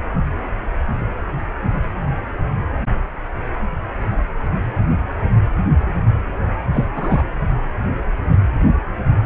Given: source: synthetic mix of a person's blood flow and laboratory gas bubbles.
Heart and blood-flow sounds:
Doppler ultrasound of blood flow; precordium
6.74-6.88 s: bubbles
6.95-7.24 s: bubbles
From the record:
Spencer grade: 1 (occasional bubble signal discernible with the cardiac motion signal, with majority of cardiac periods free of bubbles); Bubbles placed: anywhere in the cardiac cycle

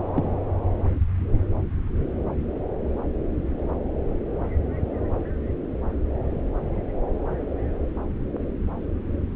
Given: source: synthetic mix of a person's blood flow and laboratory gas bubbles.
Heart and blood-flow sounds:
Doppler ultrasound of blood flow; subclavian vein
0.16-0.29 s: bubbles
From the record:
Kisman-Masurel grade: 112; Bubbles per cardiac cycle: 1 to 2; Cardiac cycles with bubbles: 1 to 10%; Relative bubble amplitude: moderate (0.250 to 0.450); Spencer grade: 1 (occasional bubble signal discernible with the cardiac motion signal, with majority of cardiac periods free of bubbles); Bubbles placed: anywhere in the cardiac cycle

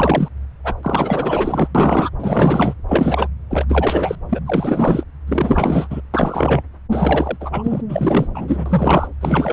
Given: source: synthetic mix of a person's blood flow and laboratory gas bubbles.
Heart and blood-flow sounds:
Doppler ultrasound of blood flow; subclavian vein
0.00-0.28 s: bubbles
0.64-0.74 s: bubbles
0.83-1.68 s: bubbles
1.74-2.10 s: bubbles
2.19-2.74 s: bubbles
2.88-3.28 s: bubbles
3.50-3.66 s: bubbles
3.69-4.16 s: bubbles
4.29-4.41 s: bubbles
4.46-5.04 s: bubbles
5.27-5.88 s: bubbles
5.90-6.01 s: bubbles
6.13-6.62 s: bubbles
6.90-7.37 s: bubbles
7.40-7.82 s: bubbles
7.88-8.28 s: bubbles
8.34-9.07 s: bubbles
9.21-9.52 s: bubbles
From the record:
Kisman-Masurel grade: 444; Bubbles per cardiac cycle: continuous sound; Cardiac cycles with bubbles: 100%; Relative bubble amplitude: maximal (0.775 to 0.999); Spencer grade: 4 (maximum detectable bubble signal sounding continuously throughout systole and diastole of every cardiac period, and overriding the amplitude of the normal cardiac signals); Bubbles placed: anywhere in the cardiac cycle

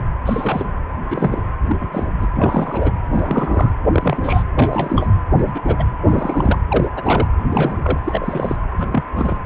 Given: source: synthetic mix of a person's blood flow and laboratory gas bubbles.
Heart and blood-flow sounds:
Doppler ultrasound of blood flow; precordium
0.25-0.66 s: bubbles
1.10-1.42 s: bubbles
1.67-1.76 s: bubbles
1.81-1.90 s: bubbles
1.92-2.08 s: bubbles
2.18-2.27 s: bubbles
2.35-2.91 s: bubbles
3.12-3.70 s: bubbles
3.92-4.43 s: bubbles
4.55-5.09 s: bubbles
5.38-5.61 s: bubbles
5.65-5.84 s: bubbles
6.06-6.58 s: bubbles
6.69-6.90 s: bubbles
6.96-7.27 s: bubbles
7.50-7.78 s: bubbles
7.83-8.00 s: bubbles
8.04-8.57 s: bubbles
8.77-9.04 s: bubbles
9.16-9.38 s: bubbles
From the record:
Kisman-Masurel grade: 242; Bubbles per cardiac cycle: several, 3 to 8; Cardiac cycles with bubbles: 100%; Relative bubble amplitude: moderate (0.250 to 0.450); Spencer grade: 3 (all of the cardiac periods contain showers or single bubble signals, but not dominating or overriding the cardiac motion signals); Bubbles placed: anywhere in the cardiac cycle

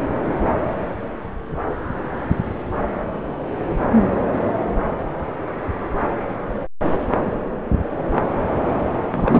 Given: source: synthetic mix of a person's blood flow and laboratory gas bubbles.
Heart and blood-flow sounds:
Doppler ultrasound of blood flow; subclavian vein
9.12-9.40 s: bubbles
From the record:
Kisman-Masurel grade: 213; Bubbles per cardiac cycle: several, 3 to 8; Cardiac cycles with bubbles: 1 to 10%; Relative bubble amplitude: loud (0.450 to 0.775); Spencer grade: 1 (occasional bubble signal discernible with the cardiac motion signal, with majority of cardiac periods free of bubbles); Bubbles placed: anywhere in the cardiac cycle

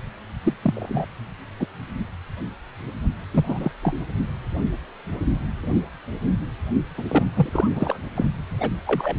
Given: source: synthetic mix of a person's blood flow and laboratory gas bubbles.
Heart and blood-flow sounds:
Doppler ultrasound of blood flow; precordium
0.43-0.53 s: bubbles
0.62-1.06 s: bubbles
1.60-1.66 s: bubbles
3.33-3.71 s: bubbles
3.82-4.04 s: bubbles
6.97-7.04 s: bubbles
7.08-7.23 s: bubbles
7.35-7.50 s: bubbles
7.52-7.99 s: bubbles
8.15-8.29 s: bubbles
8.60-8.70 s: bubbles
8.87-9.16 s: bubbles
From the record:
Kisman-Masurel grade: 222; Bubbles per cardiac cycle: several, 3 to 8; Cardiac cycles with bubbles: 10 to 50%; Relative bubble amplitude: moderate (0.250 to 0.450); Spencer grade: 2 (many but less than half of the cardiac periods contain bubble signals, singularly or in groups); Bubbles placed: only in the low amplitude regions of the cardiac cycle

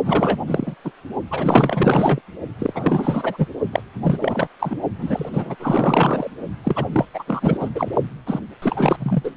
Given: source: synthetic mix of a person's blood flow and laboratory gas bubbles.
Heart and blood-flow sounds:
Doppler ultrasound of blood flow; precordium
0.04-0.37 s: bubbles
0.46-0.75 s: bubbles
0.84-0.92 s: bubbles
1.30-2.21 s: bubbles
2.58-3.47 s: bubbles
3.72-3.82 s: bubbles
4.02-4.48 s: bubbles
4.59-4.79 s: bubbles
4.98-5.29 s: bubbles
5.33-5.56 s: bubbles
5.59-6.29 s: bubbles
6.63-6.85 s: bubbles
6.92-7.05 s: bubbles
7.13-7.24 s: bubbles
7.27-7.70 s: bubbles
7.75-7.88 s: bubbles
8.26-8.40 s: bubbles
8.62-8.96 s: bubbles
9.00-9.31 s: bubbles
From the record:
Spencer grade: 4 (maximum detectable bubble signal sounding continuously throughout systole and diastole of every cardiac period, and overriding the amplitude of the normal cardiac signals); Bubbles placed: only in the low amplitude regions of the cardiac cycle

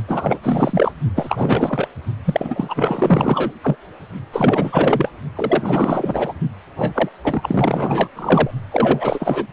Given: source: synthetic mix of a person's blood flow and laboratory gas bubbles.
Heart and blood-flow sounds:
Doppler ultrasound of blood flow; precordium
0.08-0.39 s: bubbles
0.43-0.92 s: bubbles
1.15-1.88 s: bubbles
2.25-3.52 s: bubbles
3.63-3.76 s: bubbles
4.32-5.09 s: bubbles
5.35-6.33 s: bubbles
6.76-7.08 s: bubbles
7.24-8.10 s: bubbles
8.15-8.51 s: bubbles
8.71-9.46 s: bubbles
From the record:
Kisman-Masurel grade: 444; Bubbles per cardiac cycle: continuous sound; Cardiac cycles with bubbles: 100%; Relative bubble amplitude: maximal (0.775 to 0.999); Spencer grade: 4 (maximum detectable bubble signal sounding continuously throughout systole and diastole of every cardiac period, and overriding the amplitude of the normal cardiac signals); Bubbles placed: only in the low amplitude regions of the cardiac cycle

